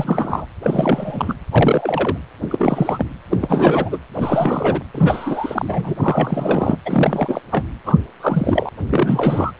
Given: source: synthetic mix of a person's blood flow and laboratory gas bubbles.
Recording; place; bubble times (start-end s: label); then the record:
Doppler ultrasound of blood flow; precordium
0.00-0.45 s: bubbles
0.62-1.34 s: bubbles
1.51-2.18 s: bubbles
2.50-3.06 s: bubbles
3.30-3.99 s: bubbles
4.13-4.81 s: bubbles
4.94-5.96 s: bubbles
5.99-6.76 s: bubbles
6.85-7.41 s: bubbles
7.51-7.63 s: bubbles
7.85-7.98 s: bubbles
8.20-8.69 s: bubbles
8.88-9.52 s: bubbles
From the record:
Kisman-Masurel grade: 342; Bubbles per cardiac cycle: rolling drumbeat, 9 or more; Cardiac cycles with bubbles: 100%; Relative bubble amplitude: moderate (0.250 to 0.450); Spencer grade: 3 (all of the cardiac periods contain showers or single bubble signals, but not dominating or overriding the cardiac motion signals); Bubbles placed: anywhere in the cardiac cycle